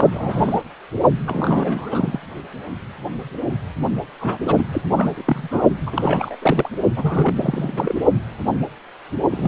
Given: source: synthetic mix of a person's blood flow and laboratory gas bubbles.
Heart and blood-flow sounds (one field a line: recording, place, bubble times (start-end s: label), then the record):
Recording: Doppler ultrasound of blood flow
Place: precordium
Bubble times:
0.00-0.08 s: bubbles
0.11-0.63 s: bubbles
1.26-2.19 s: bubbles
4.21-4.38 s: bubbles
4.47-4.66 s: bubbles
4.72-4.81 s: bubbles
4.95-5.22 s: bubbles
5.26-5.63 s: bubbles
5.86-6.35 s: bubbles
6.42-6.69 s: bubbles
6.96-8.00 s: bubbles
9.30-9.47 s: bubbles
From the record:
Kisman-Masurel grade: 332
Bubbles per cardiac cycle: rolling drumbeat, 9 or more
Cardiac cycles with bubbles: 50 to 99%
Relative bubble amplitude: moderate (0.250 to 0.450)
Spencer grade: 3 (all of the cardiac periods contain showers or single bubble signals, but not dominating or overriding the cardiac motion signals)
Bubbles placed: only in the low amplitude regions of the cardiac cycle